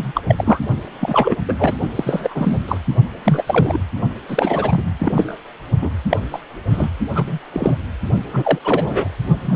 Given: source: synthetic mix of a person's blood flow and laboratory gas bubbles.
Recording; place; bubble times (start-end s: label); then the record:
Doppler ultrasound of blood flow; precordium
0.00-0.21 s: bubbles
0.28-0.60 s: bubbles
1.00-1.36 s: bubbles
1.48-1.74 s: bubbles
1.95-2.57 s: bubbles
2.68-2.78 s: bubbles
3.25-3.43 s: bubbles
3.46-3.78 s: bubbles
4.27-4.93 s: bubbles
4.99-5.38 s: bubbles
5.81-5.90 s: bubbles
6.09-6.19 s: bubbles
6.32-6.38 s: bubbles
6.69-6.88 s: bubbles
7.14-7.38 s: bubbles
7.52-7.76 s: bubbles
8.32-8.58 s: bubbles
8.63-9.08 s: bubbles
9.44-9.56 s: bubbles
From the record:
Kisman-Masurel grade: 243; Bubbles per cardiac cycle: several, 3 to 8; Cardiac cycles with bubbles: 100%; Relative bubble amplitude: loud (0.450 to 0.775); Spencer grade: 3 (all of the cardiac periods contain showers or single bubble signals, but not dominating or overriding the cardiac motion signals); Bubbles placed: only in the low amplitude regions of the cardiac cycle